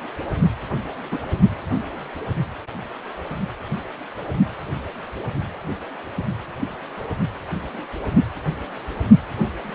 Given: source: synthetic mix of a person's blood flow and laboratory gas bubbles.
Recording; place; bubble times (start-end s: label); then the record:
Doppler ultrasound of blood flow; precordium
1.11-1.19 s: bubbles
From the record:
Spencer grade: 1 (occasional bubble signal discernible with the cardiac motion signal, with majority of cardiac periods free of bubbles); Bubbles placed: only in the low amplitude regions of the cardiac cycle